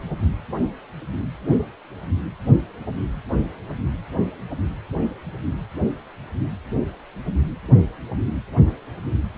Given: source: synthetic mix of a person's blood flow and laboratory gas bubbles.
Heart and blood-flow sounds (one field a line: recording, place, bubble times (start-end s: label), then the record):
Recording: Doppler ultrasound of blood flow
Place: precordium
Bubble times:
no bubbles
From the record:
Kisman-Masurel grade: 000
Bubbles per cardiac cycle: 0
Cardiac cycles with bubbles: 0%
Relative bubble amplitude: no bubbles discernible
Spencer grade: 0 (complete lack of bubble signals)